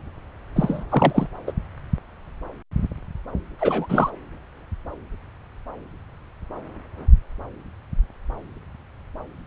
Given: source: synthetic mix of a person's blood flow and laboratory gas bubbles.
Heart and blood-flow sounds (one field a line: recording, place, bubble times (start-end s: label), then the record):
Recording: Doppler ultrasound of blood flow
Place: subclavian vein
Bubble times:
0.56-0.84 s: bubbles
0.90-1.26 s: bubbles
1.47-1.52 s: bubbles
3.59-3.86 s: bubbles
3.89-4.10 s: bubbles
From the record:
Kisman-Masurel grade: 223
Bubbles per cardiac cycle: several, 3 to 8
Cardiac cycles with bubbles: 10 to 50%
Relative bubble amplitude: loud (0.450 to 0.775)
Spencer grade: 2 (many but less than half of the cardiac periods contain bubble signals, singularly or in groups)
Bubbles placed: anywhere in the cardiac cycle